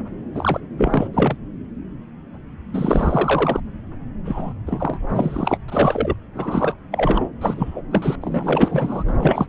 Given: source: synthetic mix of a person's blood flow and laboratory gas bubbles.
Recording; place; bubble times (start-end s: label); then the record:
Doppler ultrasound of blood flow; subclavian vein
0.35-0.60 s: bubbles
0.77-1.08 s: bubbles
1.13-1.36 s: bubbles
2.73-3.60 s: bubbles
4.25-4.54 s: bubbles
4.66-4.99 s: bubbles
5.09-5.58 s: bubbles
5.68-6.14 s: bubbles
6.34-6.76 s: bubbles
6.92-7.30 s: bubbles
7.41-7.82 s: bubbles
7.91-8.16 s: bubbles
8.21-9.04 s: bubbles
9.07-9.46 s: bubbles
From the record:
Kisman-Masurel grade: 333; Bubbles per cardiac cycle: rolling drumbeat, 9 or more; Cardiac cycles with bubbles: 50 to 99%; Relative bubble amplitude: loud (0.450 to 0.775); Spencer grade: 3 (all of the cardiac periods contain showers or single bubble signals, but not dominating or overriding the cardiac motion signals); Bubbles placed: anywhere in the cardiac cycle